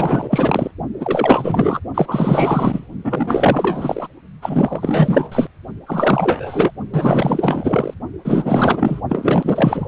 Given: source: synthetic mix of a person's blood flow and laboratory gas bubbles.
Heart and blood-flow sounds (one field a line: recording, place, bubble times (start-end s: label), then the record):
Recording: Doppler ultrasound of blood flow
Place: precordium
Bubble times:
0.00-0.71 s: bubbles
1.00-1.80 s: bubbles
1.94-2.87 s: bubbles
3.04-4.08 s: bubbles
4.42-5.47 s: bubbles
5.86-6.71 s: bubbles
6.92-7.94 s: bubbles
8.24-9.01 s: bubbles
9.09-9.88 s: bubbles
From the record:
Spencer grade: 4 (maximum detectable bubble signal sounding continuously throughout systole and diastole of every cardiac period, and overriding the amplitude of the normal cardiac signals)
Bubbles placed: only in the low amplitude regions of the cardiac cycle